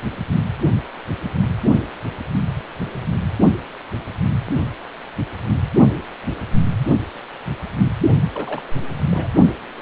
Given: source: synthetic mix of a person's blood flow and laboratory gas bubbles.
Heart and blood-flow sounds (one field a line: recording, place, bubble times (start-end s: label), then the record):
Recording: Doppler ultrasound of blood flow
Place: precordium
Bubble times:
8.24-8.29 s: bubbles
8.34-8.73 s: bubbles
9.11-9.29 s: bubbles
From the record:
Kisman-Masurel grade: 221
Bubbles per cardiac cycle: several, 3 to 8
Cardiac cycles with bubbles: 10 to 50%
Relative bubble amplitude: barely perceptible (0.100 to 0.250)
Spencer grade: 2 (many but less than half of the cardiac periods contain bubble signals, singularly or in groups)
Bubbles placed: only in the low amplitude regions of the cardiac cycle